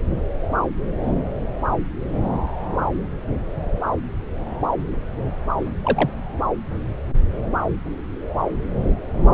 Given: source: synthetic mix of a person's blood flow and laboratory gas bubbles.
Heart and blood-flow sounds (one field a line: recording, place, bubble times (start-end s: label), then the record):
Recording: Doppler ultrasound of blood flow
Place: subclavian vein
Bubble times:
5.83-6.11 s: bubbles
From the record:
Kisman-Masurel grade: 112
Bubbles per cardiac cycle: 1 to 2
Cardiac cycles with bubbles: 1 to 10%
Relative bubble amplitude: moderate (0.250 to 0.450)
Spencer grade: 1 (occasional bubble signal discernible with the cardiac motion signal, with majority of cardiac periods free of bubbles)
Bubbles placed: anywhere in the cardiac cycle